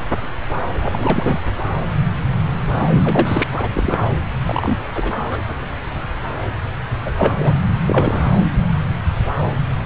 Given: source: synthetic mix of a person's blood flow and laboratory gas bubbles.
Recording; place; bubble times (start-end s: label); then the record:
Doppler ultrasound of blood flow; subclavian vein
0.80-1.40 s: bubbles
2.81-2.87 s: bubbles
2.90-3.44 s: bubbles
3.52-3.69 s: bubbles
3.73-3.98 s: bubbles
4.43-4.78 s: bubbles
4.94-5.12 s: bubbles
5.29-5.38 s: bubbles
7.05-7.13 s: bubbles
7.18-7.54 s: bubbles
7.86-8.30 s: bubbles
From the record:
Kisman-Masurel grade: 222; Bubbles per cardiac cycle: several, 3 to 8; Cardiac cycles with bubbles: 10 to 50%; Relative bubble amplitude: moderate (0.250 to 0.450); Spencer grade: 2 (many but less than half of the cardiac periods contain bubble signals, singularly or in groups); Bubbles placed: anywhere in the cardiac cycle